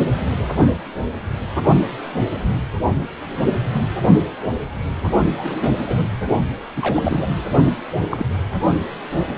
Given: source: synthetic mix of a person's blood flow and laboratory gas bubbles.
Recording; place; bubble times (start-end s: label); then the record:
Doppler ultrasound of blood flow; precordium
5.38-5.82 s: bubbles
5.88-6.06 s: bubbles
6.76-7.41 s: bubbles
8.10-8.26 s: bubbles
From the record:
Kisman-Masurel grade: 222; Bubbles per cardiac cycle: several, 3 to 8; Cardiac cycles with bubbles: 10 to 50%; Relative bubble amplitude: moderate (0.250 to 0.450); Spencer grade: 2 (many but less than half of the cardiac periods contain bubble signals, singularly or in groups); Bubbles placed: only in the low amplitude regions of the cardiac cycle